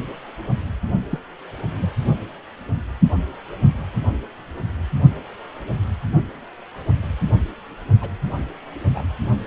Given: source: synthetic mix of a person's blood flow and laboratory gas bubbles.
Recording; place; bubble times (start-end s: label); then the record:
Doppler ultrasound of blood flow; precordium
1.10-1.20 s: bubbles
1.82-1.89 s: bubbles
8.01-8.09 s: bubbles
8.89-9.02 s: bubbles
From the record:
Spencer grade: 2 (many but less than half of the cardiac periods contain bubble signals, singularly or in groups); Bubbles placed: only in the low amplitude regions of the cardiac cycle